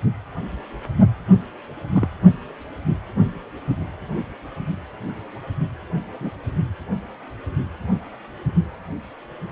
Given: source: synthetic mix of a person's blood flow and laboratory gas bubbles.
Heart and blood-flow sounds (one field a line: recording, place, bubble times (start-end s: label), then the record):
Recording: Doppler ultrasound of blood flow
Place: precordium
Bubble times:
1.94-2.08 s: bubbles
6.20-6.30 s: bubbles
From the record:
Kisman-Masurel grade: 122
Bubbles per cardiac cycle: 1 to 2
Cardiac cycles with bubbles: 10 to 50%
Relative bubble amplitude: moderate (0.250 to 0.450)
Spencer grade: 2 (many but less than half of the cardiac periods contain bubble signals, singularly or in groups)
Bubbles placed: only in the low amplitude regions of the cardiac cycle